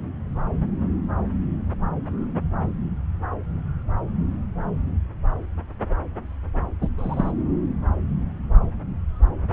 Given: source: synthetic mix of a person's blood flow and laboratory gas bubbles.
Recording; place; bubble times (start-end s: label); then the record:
Doppler ultrasound of blood flow; subclavian vein
6.81-6.88 s: bubbles
6.98-7.32 s: bubbles
From the record:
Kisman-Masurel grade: 112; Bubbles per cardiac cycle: 1 to 2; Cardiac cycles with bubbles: 1 to 10%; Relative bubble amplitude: moderate (0.250 to 0.450); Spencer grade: 1 (occasional bubble signal discernible with the cardiac motion signal, with majority of cardiac periods free of bubbles); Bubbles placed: anywhere in the cardiac cycle